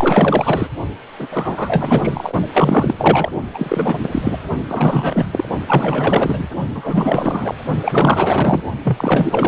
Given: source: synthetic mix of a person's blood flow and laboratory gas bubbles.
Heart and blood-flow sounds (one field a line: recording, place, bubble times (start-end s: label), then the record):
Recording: Doppler ultrasound of blood flow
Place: precordium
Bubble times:
0.00-0.68 s: bubbles
1.19-1.27 s: bubbles
1.30-2.33 s: bubbles
2.53-3.30 s: bubbles
3.54-4.08 s: bubbles
4.11-4.38 s: bubbles
4.68-5.26 s: bubbles
5.31-5.49 s: bubbles
5.67-6.49 s: bubbles
6.75-7.54 s: bubbles
7.83-8.62 s: bubbles
8.84-9.48 s: bubbles
From the record:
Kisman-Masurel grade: 444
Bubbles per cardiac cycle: continuous sound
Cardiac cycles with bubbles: 100%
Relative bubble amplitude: maximal (0.775 to 0.999)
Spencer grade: 4 (maximum detectable bubble signal sounding continuously throughout systole and diastole of every cardiac period, and overriding the amplitude of the normal cardiac signals)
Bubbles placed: only in the low amplitude regions of the cardiac cycle